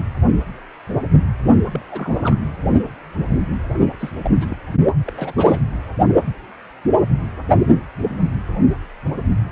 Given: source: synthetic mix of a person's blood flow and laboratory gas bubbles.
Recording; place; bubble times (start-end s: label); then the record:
Doppler ultrasound of blood flow; precordium
1.67-1.83 s: bubbles
1.88-2.35 s: bubbles
3.89-3.93 s: bubbles
3.99-4.10 s: bubbles
4.16-4.32 s: bubbles
4.41-4.47 s: bubbles
4.49-4.58 s: bubbles
5.06-5.12 s: bubbles
5.17-5.33 s: bubbles
5.37-5.61 s: bubbles
From the record:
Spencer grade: 2 (many but less than half of the cardiac periods contain bubble signals, singularly or in groups); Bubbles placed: only in the low amplitude regions of the cardiac cycle